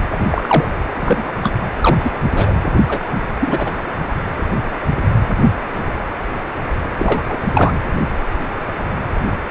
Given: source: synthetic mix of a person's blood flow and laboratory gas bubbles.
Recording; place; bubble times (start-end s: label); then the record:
Doppler ultrasound of blood flow; precordium
0.11-0.17 s: bubbles
0.30-0.68 s: bubbles
0.95-1.24 s: bubbles
1.42-1.52 s: bubbles
1.81-2.19 s: bubbles
2.32-2.54 s: bubbles
2.88-3.03 s: bubbles
3.41-3.73 s: bubbles
6.96-7.22 s: bubbles
7.29-7.38 s: bubbles
7.55-7.73 s: bubbles
From the record:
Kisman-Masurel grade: 223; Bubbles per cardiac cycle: several, 3 to 8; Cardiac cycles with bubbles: 10 to 50%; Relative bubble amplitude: loud (0.450 to 0.775); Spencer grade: 2 (many but less than half of the cardiac periods contain bubble signals, singularly or in groups); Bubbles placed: anywhere in the cardiac cycle